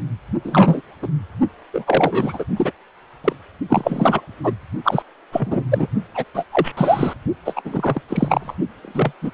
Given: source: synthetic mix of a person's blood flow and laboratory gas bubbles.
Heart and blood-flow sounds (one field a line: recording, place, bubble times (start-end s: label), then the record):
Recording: Doppler ultrasound of blood flow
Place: precordium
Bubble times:
0.43-0.81 s: bubbles
1.02-1.08 s: bubbles
1.73-2.44 s: bubbles
2.56-2.72 s: bubbles
3.24-3.32 s: bubbles
3.68-4.21 s: bubbles
4.43-4.54 s: bubbles
4.83-5.02 s: bubbles
5.32-5.63 s: bubbles
5.71-5.87 s: bubbles
6.14-6.25 s: bubbles
6.34-6.45 s: bubbles
6.51-6.72 s: bubbles
6.77-7.13 s: bubbles
7.45-7.62 s: bubbles
7.64-8.02 s: bubbles
8.08-8.55 s: bubbles
8.82-9.12 s: bubbles
9.21-9.30 s: bubbles
From the record:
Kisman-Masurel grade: 243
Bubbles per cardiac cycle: several, 3 to 8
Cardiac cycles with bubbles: 100%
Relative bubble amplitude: loud (0.450 to 0.775)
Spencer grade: 3 (all of the cardiac periods contain showers or single bubble signals, but not dominating or overriding the cardiac motion signals)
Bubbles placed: only in the low amplitude regions of the cardiac cycle